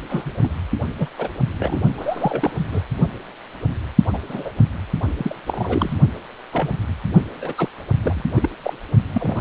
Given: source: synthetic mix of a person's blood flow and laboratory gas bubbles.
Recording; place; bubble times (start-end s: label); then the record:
Doppler ultrasound of blood flow; precordium
0.09-0.54 s: bubbles
1.00-1.08 s: bubbles
1.18-1.29 s: bubbles
1.59-1.79 s: bubbles
1.98-2.65 s: bubbles
2.71-2.83 s: bubbles
4.13-4.18 s: bubbles
4.29-4.50 s: bubbles
5.17-5.35 s: bubbles
5.47-5.93 s: bubbles
6.52-6.71 s: bubbles
7.41-7.54 s: bubbles
7.58-7.68 s: bubbles
8.00-8.25 s: bubbles
8.35-8.49 s: bubbles
8.63-8.74 s: bubbles
9.12-9.41 s: bubbles
From the record:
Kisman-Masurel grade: 232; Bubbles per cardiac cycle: several, 3 to 8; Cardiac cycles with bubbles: 50 to 99%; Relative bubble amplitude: moderate (0.250 to 0.450); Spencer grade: 3 (all of the cardiac periods contain showers or single bubble signals, but not dominating or overriding the cardiac motion signals); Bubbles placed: only in the low amplitude regions of the cardiac cycle